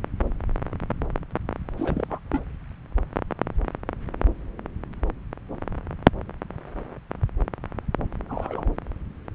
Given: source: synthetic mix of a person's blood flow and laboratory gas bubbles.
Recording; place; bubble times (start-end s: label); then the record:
Doppler ultrasound of blood flow; subclavian vein
1.77-2.07 s: bubbles
2.10-2.19 s: bubbles
2.32-2.44 s: bubbles
8.29-8.71 s: bubbles
From the record:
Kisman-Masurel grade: 211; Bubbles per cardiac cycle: several, 3 to 8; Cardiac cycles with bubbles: 1 to 10%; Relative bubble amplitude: barely perceptible (0.100 to 0.250); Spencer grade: 1 (occasional bubble signal discernible with the cardiac motion signal, with majority of cardiac periods free of bubbles); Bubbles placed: anywhere in the cardiac cycle